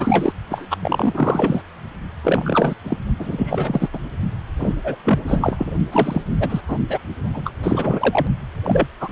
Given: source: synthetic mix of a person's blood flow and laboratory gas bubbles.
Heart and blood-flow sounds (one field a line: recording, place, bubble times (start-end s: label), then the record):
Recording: Doppler ultrasound of blood flow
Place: precordium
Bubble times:
0.00-0.32 s: bubbles
0.50-0.67 s: bubbles
0.71-0.77 s: bubbles
0.79-1.62 s: bubbles
2.23-2.73 s: bubbles
2.85-2.98 s: bubbles
3.19-3.89 s: bubbles
3.92-3.99 s: bubbles
4.60-4.75 s: bubbles
4.83-4.96 s: bubbles
5.04-5.19 s: bubbles
5.27-5.72 s: bubbles
5.92-6.21 s: bubbles
6.39-6.61 s: bubbles
6.67-6.78 s: bubbles
6.89-6.99 s: bubbles
7.33-7.42 s: bubbles
7.45-7.52 s: bubbles
7.63-8.27 s: bubbles
8.63-8.88 s: bubbles
9.01-9.12 s: bubbles
From the record:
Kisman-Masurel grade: 342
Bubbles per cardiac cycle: rolling drumbeat, 9 or more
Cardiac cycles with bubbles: 100%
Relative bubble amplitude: moderate (0.250 to 0.450)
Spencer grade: 3 (all of the cardiac periods contain showers or single bubble signals, but not dominating or overriding the cardiac motion signals)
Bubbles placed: only in the low amplitude regions of the cardiac cycle